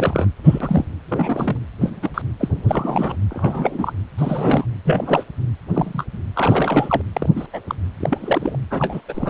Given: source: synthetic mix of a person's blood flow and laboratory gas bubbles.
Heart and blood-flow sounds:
Doppler ultrasound of blood flow; precordium
0.00-0.26 s: bubbles
0.44-0.85 s: bubbles
1.08-1.60 s: bubbles
1.80-1.90 s: bubbles
2.02-2.10 s: bubbles
2.14-2.22 s: bubbles
2.39-2.49 s: bubbles
2.68-3.16 s: bubbles
3.30-3.92 s: bubbles
4.18-4.64 s: bubbles
4.84-5.23 s: bubbles
5.70-6.04 s: bubbles
6.35-7.01 s: bubbles
7.13-7.29 s: bubbles
7.36-7.47 s: bubbles
7.53-7.61 s: bubbles
7.67-7.75 s: bubbles
8.00-8.57 s: bubbles
8.71-9.02 s: bubbles
9.09-9.30 s: bubbles
From the record:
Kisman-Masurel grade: 242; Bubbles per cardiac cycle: several, 3 to 8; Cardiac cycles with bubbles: 100%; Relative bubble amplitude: moderate (0.250 to 0.450); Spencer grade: 3 (all of the cardiac periods contain showers or single bubble signals, but not dominating or overriding the cardiac motion signals); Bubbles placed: anywhere in the cardiac cycle

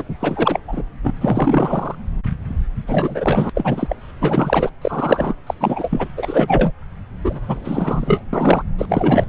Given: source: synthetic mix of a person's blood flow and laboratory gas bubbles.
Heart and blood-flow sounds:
Doppler ultrasound of blood flow; subclavian vein
0.00-0.03 s: bubbles
0.20-0.60 s: bubbles
0.68-0.83 s: bubbles
1.03-1.14 s: bubbles
1.21-1.95 s: bubbles
2.87-3.50 s: bubbles
3.54-3.96 s: bubbles
4.21-4.71 s: bubbles
4.82-5.34 s: bubbles
5.46-5.54 s: bubbles
5.60-6.08 s: bubbles
6.17-6.72 s: bubbles
7.24-8.21 s: bubbles
8.33-8.62 s: bubbles
8.78-8.86 s: bubbles
8.88-9.26 s: bubbles
From the record:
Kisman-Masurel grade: 333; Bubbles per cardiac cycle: rolling drumbeat, 9 or more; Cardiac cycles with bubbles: 50 to 99%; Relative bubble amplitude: loud (0.450 to 0.775); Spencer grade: 3 (all of the cardiac periods contain showers or single bubble signals, but not dominating or overriding the cardiac motion signals); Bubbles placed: anywhere in the cardiac cycle

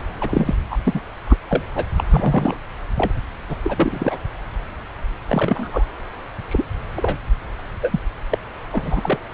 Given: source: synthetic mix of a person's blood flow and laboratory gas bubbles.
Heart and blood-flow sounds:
Doppler ultrasound of blood flow; subclavian vein
0.20-0.59 s: bubbles
0.70-0.77 s: bubbles
0.85-1.01 s: bubbles
1.26-1.37 s: bubbles
1.48-1.62 s: bubbles
1.75-1.85 s: bubbles
1.98-2.04 s: bubbles
2.10-2.57 s: bubbles
2.96-3.14 s: bubbles
3.48-3.57 s: bubbles
3.64-4.18 s: bubbles
5.26-5.84 s: bubbles
6.47-6.65 s: bubbles
6.96-7.17 s: bubbles
7.81-8.00 s: bubbles
8.29-8.38 s: bubbles
8.71-9.19 s: bubbles
From the record:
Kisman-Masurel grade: 232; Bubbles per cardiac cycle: several, 3 to 8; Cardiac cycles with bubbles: 50 to 99%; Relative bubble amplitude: moderate (0.250 to 0.450); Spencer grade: 3 (all of the cardiac periods contain showers or single bubble signals, but not dominating or overriding the cardiac motion signals); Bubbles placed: anywhere in the cardiac cycle

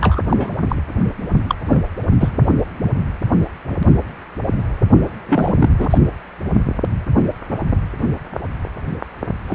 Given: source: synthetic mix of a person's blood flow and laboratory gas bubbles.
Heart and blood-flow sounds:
Doppler ultrasound of blood flow; precordium
0.00-0.21 s: bubbles
0.30-0.52 s: bubbles
0.69-0.75 s: bubbles
1.49-1.55 s: bubbles
1.68-1.83 s: bubbles
2.20-2.29 s: bubbles
5.28-5.70 s: bubbles
5.78-5.98 s: bubbles
9.47-9.54 s: bubbles
From the record:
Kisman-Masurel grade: 232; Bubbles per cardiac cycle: several, 3 to 8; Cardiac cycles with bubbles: 50 to 99%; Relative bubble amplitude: moderate (0.250 to 0.450); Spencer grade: 3 (all of the cardiac periods contain showers or single bubble signals, but not dominating or overriding the cardiac motion signals); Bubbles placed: only in the low amplitude regions of the cardiac cycle

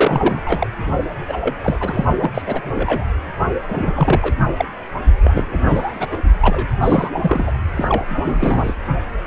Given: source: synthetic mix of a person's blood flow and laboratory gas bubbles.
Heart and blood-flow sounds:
Doppler ultrasound of blood flow; precordium
0.00-0.67 s: bubbles
1.28-1.38 s: bubbles
1.41-1.54 s: bubbles
1.64-2.05 s: bubbles
2.19-2.32 s: bubbles
2.34-2.42 s: bubbles
2.46-2.61 s: bubbles
2.74-3.05 s: bubbles
3.68-4.33 s: bubbles
4.56-4.65 s: bubbles
5.23-5.46 s: bubbles
5.49-6.07 s: bubbles
6.11-6.18 s: bubbles
6.41-6.67 s: bubbles
6.81-7.10 s: bubbles
7.22-7.51 s: bubbles
7.75-8.04 s: bubbles
8.09-8.74 s: bubbles
9.25-9.27 s: bubbles
From the record:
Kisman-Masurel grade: 342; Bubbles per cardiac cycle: rolling drumbeat, 9 or more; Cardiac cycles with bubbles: 100%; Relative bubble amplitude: moderate (0.250 to 0.450); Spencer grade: 3 (all of the cardiac periods contain showers or single bubble signals, but not dominating or overriding the cardiac motion signals); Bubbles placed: only in the low amplitude regions of the cardiac cycle

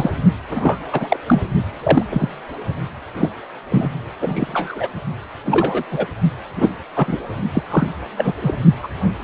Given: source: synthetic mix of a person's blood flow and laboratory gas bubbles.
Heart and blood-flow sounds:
Doppler ultrasound of blood flow; precordium
0.00-0.10 s: bubbles
0.50-0.79 s: bubbles
0.92-1.17 s: bubbles
1.26-1.42 s: bubbles
1.80-2.07 s: bubbles
2.12-2.29 s: bubbles
3.15-3.29 s: bubbles
3.71-3.93 s: bubbles
4.20-4.88 s: bubbles
5.45-5.83 s: bubbles
5.90-6.06 s: bubbles
6.56-6.69 s: bubbles
6.96-7.17 s: bubbles
7.54-7.62 s: bubbles
7.70-7.87 s: bubbles
8.16-8.34 s: bubbles
8.41-8.57 s: bubbles
8.82-8.88 s: bubbles
From the record:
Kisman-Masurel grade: 243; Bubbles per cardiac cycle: several, 3 to 8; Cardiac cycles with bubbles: 100%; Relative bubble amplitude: loud (0.450 to 0.775); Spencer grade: 3 (all of the cardiac periods contain showers or single bubble signals, but not dominating or overriding the cardiac motion signals); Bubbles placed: only in the low amplitude regions of the cardiac cycle

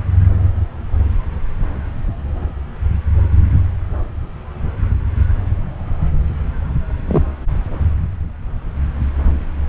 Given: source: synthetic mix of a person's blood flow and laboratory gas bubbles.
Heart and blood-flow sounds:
Doppler ultrasound of blood flow; subclavian vein
7.08-7.23 s: bubbles
From the record:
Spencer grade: 1 (occasional bubble signal discernible with the cardiac motion signal, with majority of cardiac periods free of bubbles); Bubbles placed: anywhere in the cardiac cycle

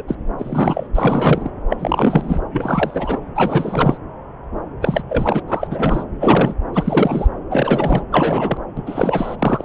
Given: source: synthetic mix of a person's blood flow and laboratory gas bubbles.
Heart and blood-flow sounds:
Doppler ultrasound of blood flow; subclavian vein
0.00-0.02 s: bubbles
0.07-0.15 s: bubbles
0.38-0.87 s: bubbles
0.94-1.51 s: bubbles
1.70-2.41 s: bubbles
2.52-3.18 s: bubbles
3.35-3.97 s: bubbles
4.81-5.02 s: bubbles
5.09-5.42 s: bubbles
5.48-6.04 s: bubbles
6.20-6.54 s: bubbles
6.73-7.28 s: bubbles
7.50-8.03 s: bubbles
8.12-8.57 s: bubbles
8.77-8.82 s: bubbles
8.86-9.36 s: bubbles
9.38-9.65 s: bubbles
From the record:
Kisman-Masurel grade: 333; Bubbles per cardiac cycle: rolling drumbeat, 9 or more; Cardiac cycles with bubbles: 50 to 99%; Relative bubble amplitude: loud (0.450 to 0.775); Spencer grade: 3 (all of the cardiac periods contain showers or single bubble signals, but not dominating or overriding the cardiac motion signals); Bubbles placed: anywhere in the cardiac cycle

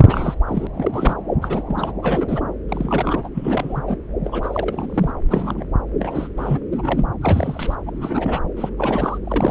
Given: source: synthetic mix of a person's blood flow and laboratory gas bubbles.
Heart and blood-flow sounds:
Doppler ultrasound of blood flow; subclavian vein
0.00-0.34 s: bubbles
0.47-0.67 s: bubbles
0.74-1.17 s: bubbles
1.41-1.62 s: bubbles
1.66-1.93 s: bubbles
2.03-2.41 s: bubbles
2.68-3.29 s: bubbles
3.34-3.96 s: bubbles
4.24-5.12 s: bubbles
5.29-5.64 s: bubbles
6.00-6.29 s: bubbles
6.37-6.59 s: bubbles
6.72-7.05 s: bubbles
7.21-7.75 s: bubbles
7.85-8.39 s: bubbles
8.56-8.70 s: bubbles
8.78-9.19 s: bubbles
9.24-9.51 s: bubbles
From the record:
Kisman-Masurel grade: 342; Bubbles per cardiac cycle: rolling drumbeat, 9 or more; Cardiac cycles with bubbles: 100%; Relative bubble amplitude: moderate (0.250 to 0.450); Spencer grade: 3 (all of the cardiac periods contain showers or single bubble signals, but not dominating or overriding the cardiac motion signals); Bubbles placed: anywhere in the cardiac cycle

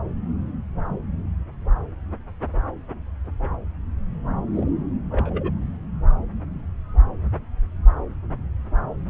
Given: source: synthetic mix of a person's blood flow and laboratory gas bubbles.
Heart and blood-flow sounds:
Doppler ultrasound of blood flow; subclavian vein
4.55-4.71 s: bubbles
5.11-5.51 s: bubbles
From the record:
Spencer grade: 1 (occasional bubble signal discernible with the cardiac motion signal, with majority of cardiac periods free of bubbles); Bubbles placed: anywhere in the cardiac cycle

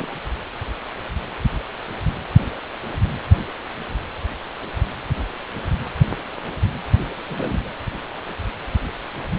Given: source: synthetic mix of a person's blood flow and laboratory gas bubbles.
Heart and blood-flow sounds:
Doppler ultrasound of blood flow; precordium
0.00-0.08 s: bubbles
7.28-7.69 s: bubbles
From the record:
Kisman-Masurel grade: 221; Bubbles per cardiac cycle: several, 3 to 8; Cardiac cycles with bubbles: 10 to 50%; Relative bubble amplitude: barely perceptible (0.100 to 0.250); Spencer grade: 2 (many but less than half of the cardiac periods contain bubble signals, singularly or in groups); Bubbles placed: anywhere in the cardiac cycle

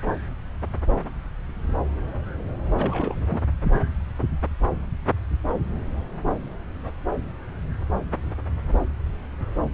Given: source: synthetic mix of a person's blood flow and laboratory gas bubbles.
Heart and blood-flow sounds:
Doppler ultrasound of blood flow; subclavian vein
2.76-3.15 s: bubbles
3.27-3.39 s: bubbles
From the record:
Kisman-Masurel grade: 211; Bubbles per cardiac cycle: several, 3 to 8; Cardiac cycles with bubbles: 1 to 10%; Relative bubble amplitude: barely perceptible (0.100 to 0.250); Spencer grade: 1 (occasional bubble signal discernible with the cardiac motion signal, with majority of cardiac periods free of bubbles); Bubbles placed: anywhere in the cardiac cycle

